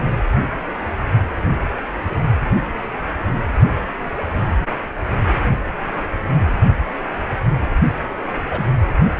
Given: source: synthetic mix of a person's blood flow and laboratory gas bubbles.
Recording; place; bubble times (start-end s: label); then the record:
Doppler ultrasound of blood flow; precordium
8.47-8.63 s: bubbles
From the record:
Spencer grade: 2 (many but less than half of the cardiac periods contain bubble signals, singularly or in groups); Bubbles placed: only in the low amplitude regions of the cardiac cycle